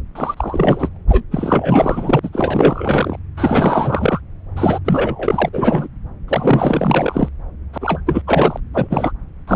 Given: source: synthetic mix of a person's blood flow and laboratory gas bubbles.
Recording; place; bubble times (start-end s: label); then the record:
Doppler ultrasound of blood flow; subclavian vein
0.15-0.89 s: bubbles
0.95-0.97 s: bubbles
1.09-1.23 s: bubbles
1.31-2.19 s: bubbles
2.23-2.29 s: bubbles
2.32-3.19 s: bubbles
3.37-4.21 s: bubbles
4.56-4.79 s: bubbles
4.84-5.50 s: bubbles
5.53-5.88 s: bubbles
6.28-7.29 s: bubbles
7.72-7.78 s: bubbles
7.81-8.01 s: bubbles
8.06-8.21 s: bubbles
8.27-8.60 s: bubbles
8.73-9.12 s: bubbles
9.47-9.56 s: bubbles
From the record:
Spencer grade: 4 (maximum detectable bubble signal sounding continuously throughout systole and diastole of every cardiac period, and overriding the amplitude of the normal cardiac signals); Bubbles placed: anywhere in the cardiac cycle